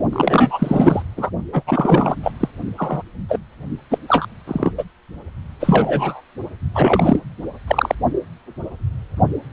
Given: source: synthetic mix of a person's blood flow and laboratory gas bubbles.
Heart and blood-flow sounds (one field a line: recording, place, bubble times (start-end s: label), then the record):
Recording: Doppler ultrasound of blood flow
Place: precordium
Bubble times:
0.12-1.02 s: bubbles
1.17-1.30 s: bubbles
1.52-1.62 s: bubbles
1.67-2.16 s: bubbles
2.23-2.31 s: bubbles
2.40-2.48 s: bubbles
2.77-3.02 s: bubbles
3.28-3.39 s: bubbles
3.90-3.98 s: bubbles
4.08-4.25 s: bubbles
4.47-4.71 s: bubbles
4.78-4.84 s: bubbles
5.59-6.21 s: bubbles
6.74-7.20 s: bubbles
7.67-7.95 s: bubbles
From the record:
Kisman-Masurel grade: 233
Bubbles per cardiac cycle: several, 3 to 8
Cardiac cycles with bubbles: 50 to 99%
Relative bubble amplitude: loud (0.450 to 0.775)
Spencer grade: 3 (all of the cardiac periods contain showers or single bubble signals, but not dominating or overriding the cardiac motion signals)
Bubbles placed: only in the low amplitude regions of the cardiac cycle